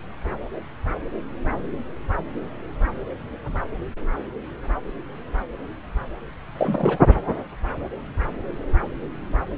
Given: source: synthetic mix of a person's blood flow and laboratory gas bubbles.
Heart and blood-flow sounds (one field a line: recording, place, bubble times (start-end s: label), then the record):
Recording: Doppler ultrasound of blood flow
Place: subclavian vein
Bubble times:
6.58-6.99 s: bubbles
From the record:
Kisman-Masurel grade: 212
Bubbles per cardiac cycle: several, 3 to 8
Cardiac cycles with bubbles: 1 to 10%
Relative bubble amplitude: moderate (0.250 to 0.450)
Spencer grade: 1 (occasional bubble signal discernible with the cardiac motion signal, with majority of cardiac periods free of bubbles)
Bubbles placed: anywhere in the cardiac cycle